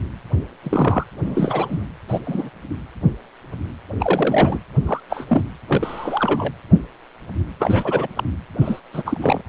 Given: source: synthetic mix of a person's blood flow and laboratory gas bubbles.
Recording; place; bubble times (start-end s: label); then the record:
Doppler ultrasound of blood flow; precordium
0.63-1.03 s: bubbles
1.25-1.85 s: bubbles
2.08-2.20 s: bubbles
2.25-2.50 s: bubbles
3.99-4.58 s: bubbles
4.87-5.00 s: bubbles
5.09-5.25 s: bubbles
5.27-5.42 s: bubbles
5.67-6.51 s: bubbles
7.59-8.07 s: bubbles
8.17-8.23 s: bubbles
8.60-8.80 s: bubbles
8.93-9.03 s: bubbles
9.05-9.41 s: bubbles
From the record:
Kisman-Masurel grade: 232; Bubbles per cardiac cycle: several, 3 to 8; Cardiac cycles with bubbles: 50 to 99%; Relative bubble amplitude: moderate (0.250 to 0.450); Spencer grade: 3 (all of the cardiac periods contain showers or single bubble signals, but not dominating or overriding the cardiac motion signals); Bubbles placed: anywhere in the cardiac cycle